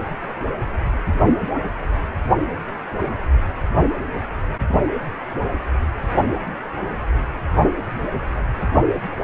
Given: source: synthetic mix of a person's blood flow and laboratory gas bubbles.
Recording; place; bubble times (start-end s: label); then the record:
Doppler ultrasound of blood flow; precordium
no bubbles
From the record:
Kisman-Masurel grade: 000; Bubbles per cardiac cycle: 0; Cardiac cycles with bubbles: 0%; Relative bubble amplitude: no bubbles discernible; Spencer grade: 0 (complete lack of bubble signals)